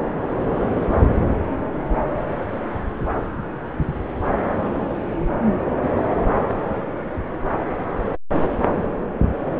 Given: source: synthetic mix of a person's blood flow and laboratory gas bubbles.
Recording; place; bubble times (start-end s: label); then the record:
Doppler ultrasound of blood flow; subclavian vein
no bubbles
From the record:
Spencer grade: 0 (complete lack of bubble signals)